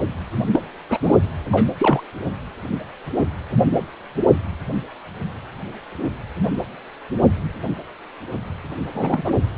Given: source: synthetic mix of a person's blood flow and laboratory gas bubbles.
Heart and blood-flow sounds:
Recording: Doppler ultrasound of blood flow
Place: precordium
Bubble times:
0.51-0.59 s: bubbles
0.89-0.97 s: bubbles
1.03-1.16 s: bubbles
1.52-1.69 s: bubbles
1.78-2.03 s: bubbles
8.94-9.33 s: bubbles
From the record:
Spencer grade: 2 (many but less than half of the cardiac periods contain bubble signals, singularly or in groups)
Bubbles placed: anywhere in the cardiac cycle

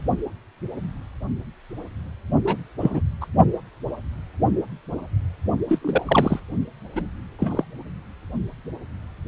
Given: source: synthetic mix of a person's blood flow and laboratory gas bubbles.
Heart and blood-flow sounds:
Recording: Doppler ultrasound of blood flow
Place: precordium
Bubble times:
2.45-2.57 s: bubbles
2.80-3.00 s: bubbles
3.21-3.27 s: bubbles
5.68-5.79 s: bubbles
5.81-6.39 s: bubbles
6.95-7.02 s: bubbles
7.38-7.64 s: bubbles
From the record:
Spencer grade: 2 (many but less than half of the cardiac periods contain bubble signals, singularly or in groups)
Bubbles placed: only in the low amplitude regions of the cardiac cycle

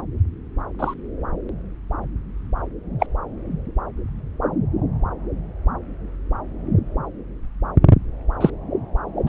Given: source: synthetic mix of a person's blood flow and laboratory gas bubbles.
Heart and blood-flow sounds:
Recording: Doppler ultrasound of blood flow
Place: subclavian vein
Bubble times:
0.79-0.94 s: bubbles
2.99-3.06 s: bubbles
8.40-8.50 s: bubbles
9.26-9.29 s: bubbles
From the record:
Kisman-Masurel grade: 123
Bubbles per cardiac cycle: 1 to 2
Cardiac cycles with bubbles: 10 to 50%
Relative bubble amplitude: loud (0.450 to 0.775)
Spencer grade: 2 (many but less than half of the cardiac periods contain bubble signals, singularly or in groups)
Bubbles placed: anywhere in the cardiac cycle

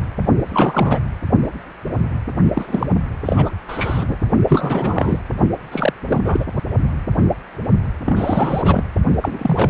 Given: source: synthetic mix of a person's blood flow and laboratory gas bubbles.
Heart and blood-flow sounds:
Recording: Doppler ultrasound of blood flow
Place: precordium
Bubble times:
0.48-1.00 s: bubbles
2.53-2.86 s: bubbles
3.25-3.54 s: bubbles
3.68-4.17 s: bubbles
4.48-5.19 s: bubbles
5.71-5.93 s: bubbles
6.06-6.45 s: bubbles
8.05-8.82 s: bubbles
9.22-9.70 s: bubbles
From the record:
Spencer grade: 3 (all of the cardiac periods contain showers or single bubble signals, but not dominating or overriding the cardiac motion signals)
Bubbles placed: only in the low amplitude regions of the cardiac cycle

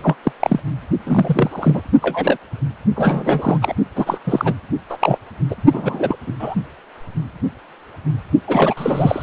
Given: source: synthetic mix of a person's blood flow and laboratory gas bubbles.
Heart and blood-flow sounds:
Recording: Doppler ultrasound of blood flow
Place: precordium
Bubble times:
0.00-0.16 s: bubbles
0.23-0.33 s: bubbles
0.40-0.59 s: bubbles
1.06-1.81 s: bubbles
2.02-2.37 s: bubbles
2.96-3.57 s: bubbles
3.61-3.74 s: bubbles
3.95-4.18 s: bubbles
4.27-4.54 s: bubbles
4.89-5.18 s: bubbles
5.50-5.55 s: bubbles
5.72-6.16 s: bubbles
6.27-6.32 s: bubbles
6.39-6.55 s: bubbles
8.47-8.74 s: bubbles
8.77-9.22 s: bubbles
From the record:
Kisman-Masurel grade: 233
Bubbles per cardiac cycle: several, 3 to 8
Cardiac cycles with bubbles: 50 to 99%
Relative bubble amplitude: loud (0.450 to 0.775)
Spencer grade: 3 (all of the cardiac periods contain showers or single bubble signals, but not dominating or overriding the cardiac motion signals)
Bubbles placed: only in the low amplitude regions of the cardiac cycle

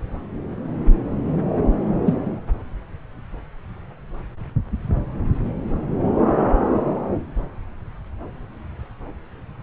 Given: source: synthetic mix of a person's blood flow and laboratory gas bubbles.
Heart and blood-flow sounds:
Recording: Doppler ultrasound of blood flow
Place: subclavian vein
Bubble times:
2.05-2.14 s: bubbles
From the record:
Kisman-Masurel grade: 113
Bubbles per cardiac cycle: 1 to 2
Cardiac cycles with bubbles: 1 to 10%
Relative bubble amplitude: loud (0.450 to 0.775)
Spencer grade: 1 (occasional bubble signal discernible with the cardiac motion signal, with majority of cardiac periods free of bubbles)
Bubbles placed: anywhere in the cardiac cycle

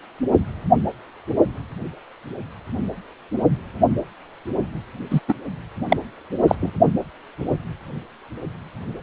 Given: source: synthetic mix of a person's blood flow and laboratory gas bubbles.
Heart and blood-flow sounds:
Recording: Doppler ultrasound of blood flow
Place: precordium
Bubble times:
5.11-5.20 s: bubbles
5.28-5.33 s: bubbles
5.88-5.97 s: bubbles
6.47-6.55 s: bubbles
6.62-6.71 s: bubbles
From the record:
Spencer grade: 1 (occasional bubble signal discernible with the cardiac motion signal, with majority of cardiac periods free of bubbles)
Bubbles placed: only in the low amplitude regions of the cardiac cycle

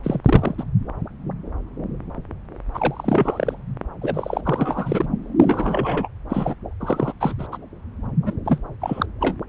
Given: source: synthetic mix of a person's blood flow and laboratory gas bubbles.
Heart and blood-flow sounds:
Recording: Doppler ultrasound of blood flow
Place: subclavian vein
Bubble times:
0.03-0.21 s: bubbles
0.24-0.55 s: bubbles
0.57-0.64 s: bubbles
2.74-3.55 s: bubbles
4.02-5.08 s: bubbles
5.40-6.08 s: bubbles
6.29-6.54 s: bubbles
6.80-7.12 s: bubbles
7.20-7.33 s: bubbles
7.38-7.46 s: bubbles
7.52-7.58 s: bubbles
8.26-8.33 s: bubbles
8.45-8.59 s: bubbles
8.81-9.06 s: bubbles
9.20-9.36 s: bubbles
From the record:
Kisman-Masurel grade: 333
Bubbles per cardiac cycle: rolling drumbeat, 9 or more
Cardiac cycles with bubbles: 50 to 99%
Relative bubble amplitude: loud (0.450 to 0.775)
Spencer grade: 3 (all of the cardiac periods contain showers or single bubble signals, but not dominating or overriding the cardiac motion signals)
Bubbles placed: anywhere in the cardiac cycle

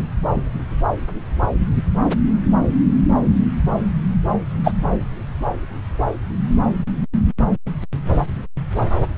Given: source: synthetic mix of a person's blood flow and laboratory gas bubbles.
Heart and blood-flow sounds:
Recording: Doppler ultrasound of blood flow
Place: subclavian vein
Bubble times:
4.63-4.73 s: bubbles
From the record:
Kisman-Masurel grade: 113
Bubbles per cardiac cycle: 1 to 2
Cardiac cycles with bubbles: 1 to 10%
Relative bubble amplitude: loud (0.450 to 0.775)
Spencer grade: 1 (occasional bubble signal discernible with the cardiac motion signal, with majority of cardiac periods free of bubbles)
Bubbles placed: anywhere in the cardiac cycle

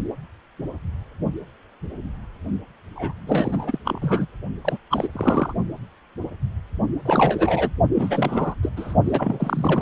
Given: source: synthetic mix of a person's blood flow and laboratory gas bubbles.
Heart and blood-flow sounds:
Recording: Doppler ultrasound of blood flow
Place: precordium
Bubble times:
2.95-3.13 s: bubbles
3.27-3.79 s: bubbles
3.84-4.26 s: bubbles
4.64-4.78 s: bubbles
4.90-5.08 s: bubbles
5.12-5.53 s: bubbles
7.05-7.70 s: bubbles
7.94-8.55 s: bubbles
8.62-8.71 s: bubbles
8.76-8.95 s: bubbles
9.04-9.81 s: bubbles
From the record:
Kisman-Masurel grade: 333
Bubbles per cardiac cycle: rolling drumbeat, 9 or more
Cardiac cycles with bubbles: 50 to 99%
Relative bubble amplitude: loud (0.450 to 0.775)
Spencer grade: 3 (all of the cardiac periods contain showers or single bubble signals, but not dominating or overriding the cardiac motion signals)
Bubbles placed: only in the low amplitude regions of the cardiac cycle

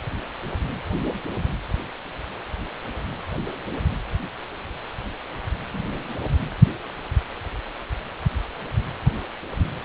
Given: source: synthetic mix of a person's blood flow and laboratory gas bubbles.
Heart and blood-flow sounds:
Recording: Doppler ultrasound of blood flow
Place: precordium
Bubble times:
5.69-6.15 s: bubbles
6.23-6.26 s: bubbles
From the record:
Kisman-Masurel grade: 111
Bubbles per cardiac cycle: 1 to 2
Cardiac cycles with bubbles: 1 to 10%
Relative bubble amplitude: barely perceptible (0.100 to 0.250)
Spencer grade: 1 (occasional bubble signal discernible with the cardiac motion signal, with majority of cardiac periods free of bubbles)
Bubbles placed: anywhere in the cardiac cycle

